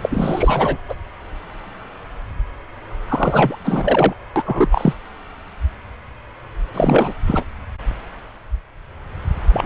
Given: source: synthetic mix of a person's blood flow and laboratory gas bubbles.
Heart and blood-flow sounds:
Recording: Doppler ultrasound of blood flow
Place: subclavian vein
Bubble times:
0.00-0.77 s: bubbles
0.89-0.94 s: bubbles
3.08-3.56 s: bubbles
3.64-4.14 s: bubbles
4.36-4.43 s: bubbles
4.46-4.69 s: bubbles
4.71-4.94 s: bubbles
6.74-7.14 s: bubbles
7.26-7.45 s: bubbles
9.51-9.66 s: bubbles
From the record:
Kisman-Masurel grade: 333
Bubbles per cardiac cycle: rolling drumbeat, 9 or more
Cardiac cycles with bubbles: 50 to 99%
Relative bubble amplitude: loud (0.450 to 0.775)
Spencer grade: 3 (all of the cardiac periods contain showers or single bubble signals, but not dominating or overriding the cardiac motion signals)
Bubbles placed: anywhere in the cardiac cycle

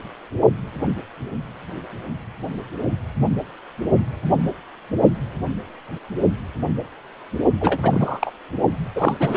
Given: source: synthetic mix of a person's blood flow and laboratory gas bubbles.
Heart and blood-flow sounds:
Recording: Doppler ultrasound of blood flow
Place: precordium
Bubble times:
7.61-8.30 s: bubbles
8.96-9.37 s: bubbles
From the record:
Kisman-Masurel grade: 222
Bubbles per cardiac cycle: several, 3 to 8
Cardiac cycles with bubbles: 10 to 50%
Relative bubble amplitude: moderate (0.250 to 0.450)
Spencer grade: 2 (many but less than half of the cardiac periods contain bubble signals, singularly or in groups)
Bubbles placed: only in the low amplitude regions of the cardiac cycle

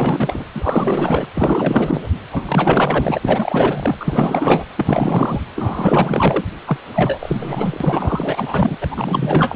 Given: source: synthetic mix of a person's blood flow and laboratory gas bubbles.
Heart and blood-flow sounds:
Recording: Doppler ultrasound of blood flow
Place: precordium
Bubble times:
0.00-0.44 s: bubbles
0.54-1.27 s: bubbles
1.33-2.08 s: bubbles
2.31-3.19 s: bubbles
3.21-3.97 s: bubbles
4.00-4.64 s: bubbles
4.77-5.41 s: bubbles
5.55-6.45 s: bubbles
6.66-6.77 s: bubbles
6.93-8.75 s: bubbles
8.81-8.87 s: bubbles
8.91-9.56 s: bubbles
From the record:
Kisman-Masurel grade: 444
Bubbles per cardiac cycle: continuous sound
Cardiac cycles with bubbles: 100%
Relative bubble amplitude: maximal (0.775 to 0.999)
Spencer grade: 4 (maximum detectable bubble signal sounding continuously throughout systole and diastole of every cardiac period, and overriding the amplitude of the normal cardiac signals)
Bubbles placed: anywhere in the cardiac cycle

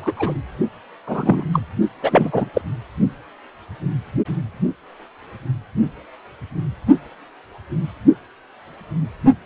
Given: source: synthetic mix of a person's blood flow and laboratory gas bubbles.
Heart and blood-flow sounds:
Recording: Doppler ultrasound of blood flow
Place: precordium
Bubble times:
0.00-0.13 s: bubbles
0.17-0.33 s: bubbles
1.07-1.46 s: bubbles
1.52-1.60 s: bubbles
2.00-2.49 s: bubbles
2.53-2.61 s: bubbles
From the record:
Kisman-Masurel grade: 223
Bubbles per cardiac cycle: several, 3 to 8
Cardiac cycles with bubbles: 10 to 50%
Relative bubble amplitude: loud (0.450 to 0.775)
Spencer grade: 2 (many but less than half of the cardiac periods contain bubble signals, singularly or in groups)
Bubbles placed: only in the low amplitude regions of the cardiac cycle

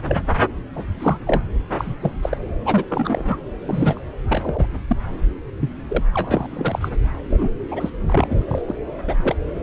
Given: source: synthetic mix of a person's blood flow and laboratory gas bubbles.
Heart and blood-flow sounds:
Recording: Doppler ultrasound of blood flow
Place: subclavian vein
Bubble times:
0.06-0.23 s: bubbles
0.75-0.83 s: bubbles
0.99-1.17 s: bubbles
1.27-1.41 s: bubbles
1.78-1.95 s: bubbles
2.01-2.12 s: bubbles
2.22-2.38 s: bubbles
2.65-2.85 s: bubbles
2.89-3.40 s: bubbles
3.62-4.01 s: bubbles
4.29-4.67 s: bubbles
4.88-4.96 s: bubbles
5.61-5.70 s: bubbles
5.89-6.04 s: bubbles
6.14-6.47 s: bubbles
6.51-6.89 s: bubbles
7.28-7.50 s: bubbles
7.71-7.89 s: bubbles
8.06-8.40 s: bubbles
8.47-8.62 s: bubbles
8.68-8.74 s: bubbles
9.06-9.14 s: bubbles
9.18-9.35 s: bubbles
From the record:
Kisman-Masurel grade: 243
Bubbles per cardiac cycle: several, 3 to 8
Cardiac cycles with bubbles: 100%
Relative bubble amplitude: loud (0.450 to 0.775)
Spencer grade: 3 (all of the cardiac periods contain showers or single bubble signals, but not dominating or overriding the cardiac motion signals)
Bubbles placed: anywhere in the cardiac cycle

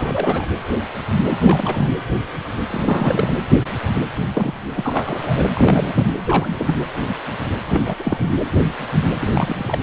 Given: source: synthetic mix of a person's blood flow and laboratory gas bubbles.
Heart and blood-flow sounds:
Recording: Doppler ultrasound of blood flow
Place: precordium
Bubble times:
0.00-0.46 s: bubbles
1.28-1.92 s: bubbles
2.70-3.32 s: bubbles
4.16-4.27 s: bubbles
4.31-4.53 s: bubbles
4.76-5.46 s: bubbles
5.53-6.11 s: bubbles
6.25-6.75 s: bubbles
7.68-7.95 s: bubbles
7.99-8.29 s: bubbles
9.21-9.79 s: bubbles
From the record:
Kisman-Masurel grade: 232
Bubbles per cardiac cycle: several, 3 to 8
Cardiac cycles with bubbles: 50 to 99%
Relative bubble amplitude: moderate (0.250 to 0.450)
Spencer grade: 3 (all of the cardiac periods contain showers or single bubble signals, but not dominating or overriding the cardiac motion signals)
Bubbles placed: anywhere in the cardiac cycle

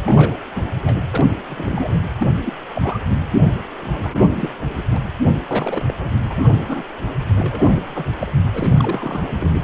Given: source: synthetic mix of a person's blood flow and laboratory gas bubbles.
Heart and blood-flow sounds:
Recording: Doppler ultrasound of blood flow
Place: precordium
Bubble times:
0.06-0.39 s: bubbles
0.54-0.70 s: bubbles
0.81-0.96 s: bubbles
1.10-1.24 s: bubbles
1.48-1.98 s: bubbles
2.19-2.27 s: bubbles
2.42-2.57 s: bubbles
2.73-2.99 s: bubbles
3.81-4.51 s: bubbles
4.75-4.83 s: bubbles
4.90-5.00 s: bubbles
5.50-5.93 s: bubbles
5.97-6.15 s: bubbles
6.26-6.49 s: bubbles
6.51-6.83 s: bubbles
7.36-8.11 s: bubbles
8.21-8.32 s: bubbles
8.54-9.30 s: bubbles
9.39-9.51 s: bubbles
From the record:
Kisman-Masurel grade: 232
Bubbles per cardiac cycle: several, 3 to 8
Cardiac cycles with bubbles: 50 to 99%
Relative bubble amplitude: moderate (0.250 to 0.450)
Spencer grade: 3 (all of the cardiac periods contain showers or single bubble signals, but not dominating or overriding the cardiac motion signals)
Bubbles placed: anywhere in the cardiac cycle

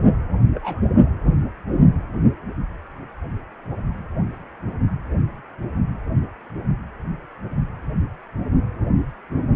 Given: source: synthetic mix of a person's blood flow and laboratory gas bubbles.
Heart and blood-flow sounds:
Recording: Doppler ultrasound of blood flow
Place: precordium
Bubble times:
0.54-0.80 s: bubbles
From the record:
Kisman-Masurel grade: 112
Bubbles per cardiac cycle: 1 to 2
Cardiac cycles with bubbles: 1 to 10%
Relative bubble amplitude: moderate (0.250 to 0.450)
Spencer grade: 1 (occasional bubble signal discernible with the cardiac motion signal, with majority of cardiac periods free of bubbles)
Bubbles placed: anywhere in the cardiac cycle

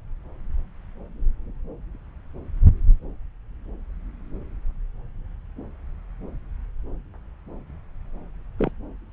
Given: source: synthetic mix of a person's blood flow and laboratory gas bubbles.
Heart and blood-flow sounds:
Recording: Doppler ultrasound of blood flow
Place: subclavian vein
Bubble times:
8.58-8.71 s: bubbles
From the record:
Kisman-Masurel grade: 111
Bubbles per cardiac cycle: 1 to 2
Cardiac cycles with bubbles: 1 to 10%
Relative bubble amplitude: barely perceptible (0.100 to 0.250)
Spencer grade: 1 (occasional bubble signal discernible with the cardiac motion signal, with majority of cardiac periods free of bubbles)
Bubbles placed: anywhere in the cardiac cycle

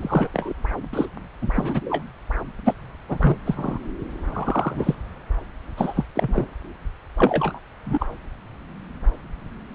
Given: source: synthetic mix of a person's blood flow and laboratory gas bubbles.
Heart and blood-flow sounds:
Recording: Doppler ultrasound of blood flow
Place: subclavian vein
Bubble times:
0.01-0.29 s: bubbles
0.33-0.53 s: bubbles
0.93-1.05 s: bubbles
1.42-1.50 s: bubbles
1.53-1.80 s: bubbles
1.90-2.03 s: bubbles
2.65-2.73 s: bubbles
3.08-3.37 s: bubbles
3.45-3.79 s: bubbles
4.33-4.95 s: bubbles
5.77-6.05 s: bubbles
6.15-6.46 s: bubbles
7.18-7.59 s: bubbles
7.85-8.07 s: bubbles
From the record:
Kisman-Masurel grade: 232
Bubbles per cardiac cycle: several, 3 to 8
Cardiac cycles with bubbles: 50 to 99%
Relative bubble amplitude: moderate (0.250 to 0.450)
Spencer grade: 3 (all of the cardiac periods contain showers or single bubble signals, but not dominating or overriding the cardiac motion signals)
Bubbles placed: anywhere in the cardiac cycle

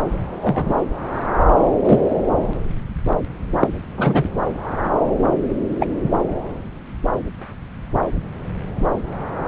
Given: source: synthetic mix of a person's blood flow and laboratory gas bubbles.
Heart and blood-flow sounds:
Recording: Doppler ultrasound of blood flow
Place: subclavian vein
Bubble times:
0.41-0.75 s: bubbles
1.84-2.00 s: bubbles
3.60-3.67 s: bubbles
3.97-4.25 s: bubbles
5.81-5.86 s: bubbles
From the record:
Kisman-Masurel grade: 123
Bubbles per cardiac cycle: 1 to 2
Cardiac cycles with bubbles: 10 to 50%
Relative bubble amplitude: loud (0.450 to 0.775)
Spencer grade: 2 (many but less than half of the cardiac periods contain bubble signals, singularly or in groups)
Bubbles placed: anywhere in the cardiac cycle

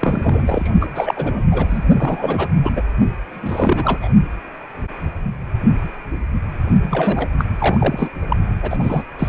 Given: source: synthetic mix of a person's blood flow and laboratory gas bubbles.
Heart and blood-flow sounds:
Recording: Doppler ultrasound of blood flow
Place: precordium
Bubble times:
0.00-0.70 s: bubbles
0.80-1.43 s: bubbles
1.51-1.85 s: bubbles
1.98-2.47 s: bubbles
2.62-2.71 s: bubbles
2.75-2.83 s: bubbles
3.33-4.11 s: bubbles
6.83-7.28 s: bubbles
7.38-7.45 s: bubbles
7.57-8.09 s: bubbles
8.29-8.37 s: bubbles
8.62-9.03 s: bubbles
9.19-9.28 s: bubbles
From the record:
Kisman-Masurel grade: 332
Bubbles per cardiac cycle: rolling drumbeat, 9 or more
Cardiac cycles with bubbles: 50 to 99%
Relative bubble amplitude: moderate (0.250 to 0.450)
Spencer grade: 3 (all of the cardiac periods contain showers or single bubble signals, but not dominating or overriding the cardiac motion signals)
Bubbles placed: only in the low amplitude regions of the cardiac cycle

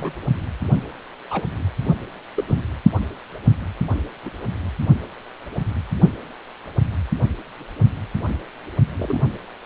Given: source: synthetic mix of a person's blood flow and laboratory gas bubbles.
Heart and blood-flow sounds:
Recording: Doppler ultrasound of blood flow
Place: precordium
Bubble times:
0.00-0.12 s: bubbles
1.31-1.41 s: bubbles
2.36-2.43 s: bubbles
2.48-2.61 s: bubbles
4.25-4.30 s: bubbles
8.98-9.18 s: bubbles
From the record:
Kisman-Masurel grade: 122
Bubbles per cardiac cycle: 1 to 2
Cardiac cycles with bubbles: 10 to 50%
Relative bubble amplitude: moderate (0.250 to 0.450)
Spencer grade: 2 (many but less than half of the cardiac periods contain bubble signals, singularly or in groups)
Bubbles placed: only in the low amplitude regions of the cardiac cycle

